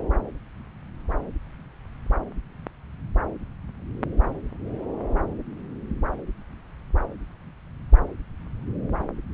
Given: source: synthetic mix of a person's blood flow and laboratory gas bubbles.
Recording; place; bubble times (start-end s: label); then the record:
Doppler ultrasound of blood flow; subclavian vein
no bubbles
From the record:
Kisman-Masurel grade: 000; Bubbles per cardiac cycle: 0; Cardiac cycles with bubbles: 0%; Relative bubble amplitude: no bubbles discernible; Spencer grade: 0 (complete lack of bubble signals)